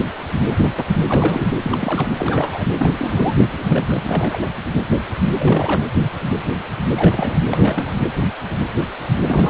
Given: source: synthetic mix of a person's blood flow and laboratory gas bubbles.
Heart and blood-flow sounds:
Doppler ultrasound of blood flow; precordium
1.04-1.56 s: bubbles
1.62-2.12 s: bubbles
2.18-2.64 s: bubbles
2.77-2.91 s: bubbles
2.98-3.35 s: bubbles
3.56-4.46 s: bubbles
5.39-5.82 s: bubbles
6.96-7.34 s: bubbles
7.50-8.03 s: bubbles
9.26-9.50 s: bubbles
From the record:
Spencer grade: 3 (all of the cardiac periods contain showers or single bubble signals, but not dominating or overriding the cardiac motion signals); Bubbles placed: anywhere in the cardiac cycle

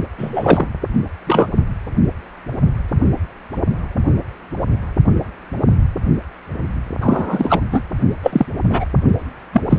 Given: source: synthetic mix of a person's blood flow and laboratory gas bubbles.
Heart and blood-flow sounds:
Doppler ultrasound of blood flow; precordium
0.17-0.67 s: bubbles
1.27-1.48 s: bubbles
7.00-7.62 s: bubbles
7.71-7.83 s: bubbles
8.22-8.46 s: bubbles
8.69-8.85 s: bubbles
9.53-9.61 s: bubbles
9.70-9.79 s: bubbles
From the record:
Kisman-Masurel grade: 223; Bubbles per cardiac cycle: several, 3 to 8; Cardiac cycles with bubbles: 10 to 50%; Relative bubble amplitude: loud (0.450 to 0.775); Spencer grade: 2 (many but less than half of the cardiac periods contain bubble signals, singularly or in groups); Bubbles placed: only in the low amplitude regions of the cardiac cycle

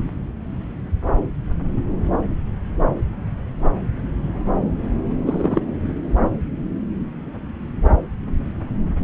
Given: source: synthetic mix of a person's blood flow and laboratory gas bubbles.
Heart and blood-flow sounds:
Doppler ultrasound of blood flow; subclavian vein
5.26-5.61 s: bubbles
From the record:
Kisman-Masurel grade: 113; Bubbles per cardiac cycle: 1 to 2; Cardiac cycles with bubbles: 1 to 10%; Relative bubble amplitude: loud (0.450 to 0.775); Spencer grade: 1 (occasional bubble signal discernible with the cardiac motion signal, with majority of cardiac periods free of bubbles); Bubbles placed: anywhere in the cardiac cycle

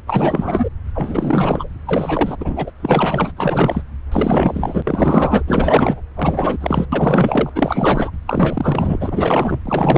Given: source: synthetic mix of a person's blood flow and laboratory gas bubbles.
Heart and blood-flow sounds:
Doppler ultrasound of blood flow; subclavian vein
0.07-0.69 s: bubbles
0.94-1.69 s: bubbles
1.85-2.36 s: bubbles
2.40-2.71 s: bubbles
2.80-3.32 s: bubbles
3.37-3.84 s: bubbles
4.12-5.42 s: bubbles
5.47-6.02 s: bubbles
6.16-6.86 s: bubbles
6.92-7.50 s: bubbles
7.55-8.11 s: bubbles
8.26-9.60 s: bubbles
9.65-9.98 s: bubbles
From the record:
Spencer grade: 4 (maximum detectable bubble signal sounding continuously throughout systole and diastole of every cardiac period, and overriding the amplitude of the normal cardiac signals); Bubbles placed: anywhere in the cardiac cycle

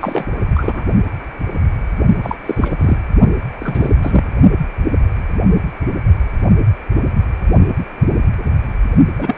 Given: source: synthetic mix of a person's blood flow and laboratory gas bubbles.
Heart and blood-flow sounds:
Doppler ultrasound of blood flow; precordium
0.01-0.25 s: bubbles
0.55-0.84 s: bubbles
2.23-2.38 s: bubbles
2.46-2.76 s: bubbles
2.79-2.98 s: bubbles
3.58-3.94 s: bubbles
4.01-4.25 s: bubbles
9.18-9.36 s: bubbles
From the record:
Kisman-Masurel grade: 233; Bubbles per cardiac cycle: several, 3 to 8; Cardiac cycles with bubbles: 50 to 99%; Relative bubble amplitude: loud (0.450 to 0.775); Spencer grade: 3 (all of the cardiac periods contain showers or single bubble signals, but not dominating or overriding the cardiac motion signals); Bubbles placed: only in the low amplitude regions of the cardiac cycle

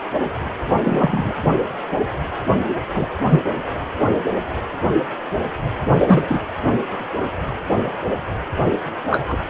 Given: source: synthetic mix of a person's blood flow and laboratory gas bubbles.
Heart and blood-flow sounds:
Doppler ultrasound of blood flow; precordium
0.83-1.34 s: bubbles
2.95-3.06 s: bubbles
3.30-3.43 s: bubbles
5.99-6.40 s: bubbles
9.11-9.37 s: bubbles
From the record:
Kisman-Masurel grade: 123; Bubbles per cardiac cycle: 1 to 2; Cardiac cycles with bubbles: 10 to 50%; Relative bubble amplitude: loud (0.450 to 0.775); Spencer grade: 2 (many but less than half of the cardiac periods contain bubble signals, singularly or in groups); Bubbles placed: anywhere in the cardiac cycle

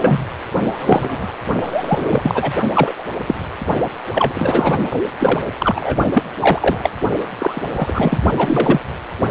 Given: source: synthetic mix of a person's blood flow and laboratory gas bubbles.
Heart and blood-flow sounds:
Doppler ultrasound of blood flow; precordium
0.01-0.26 s: bubbles
0.56-1.33 s: bubbles
1.62-2.52 s: bubbles
2.73-2.94 s: bubbles
2.98-3.04 s: bubbles
3.27-3.35 s: bubbles
4.12-4.78 s: bubbles
5.19-5.44 s: bubbles
5.59-5.97 s: bubbles
6.04-6.22 s: bubbles
6.38-6.90 s: bubbles
7.38-8.18 s: bubbles
8.37-8.80 s: bubbles
From the record:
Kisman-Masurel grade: 243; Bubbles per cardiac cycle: several, 3 to 8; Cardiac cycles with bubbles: 100%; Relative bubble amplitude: loud (0.450 to 0.775); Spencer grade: 3 (all of the cardiac periods contain showers or single bubble signals, but not dominating or overriding the cardiac motion signals); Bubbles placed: only in the low amplitude regions of the cardiac cycle

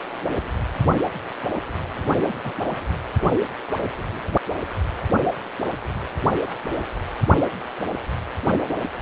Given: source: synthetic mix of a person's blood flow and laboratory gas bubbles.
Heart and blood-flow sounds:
Doppler ultrasound of blood flow; precordium
2.27-2.36 s: bubbles
2.43-2.51 s: bubbles
From the record:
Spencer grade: 1 (occasional bubble signal discernible with the cardiac motion signal, with majority of cardiac periods free of bubbles); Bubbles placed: anywhere in the cardiac cycle

